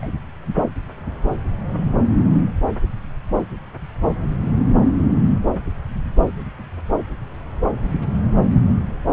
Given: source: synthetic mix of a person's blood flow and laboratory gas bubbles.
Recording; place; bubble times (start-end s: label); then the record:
Doppler ultrasound of blood flow; subclavian vein
0.00-0.07 s: bubbles
From the record:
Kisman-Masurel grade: 211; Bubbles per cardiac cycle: several, 3 to 8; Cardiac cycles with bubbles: 1 to 10%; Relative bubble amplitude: barely perceptible (0.100 to 0.250); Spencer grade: 1 (occasional bubble signal discernible with the cardiac motion signal, with majority of cardiac periods free of bubbles); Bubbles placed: anywhere in the cardiac cycle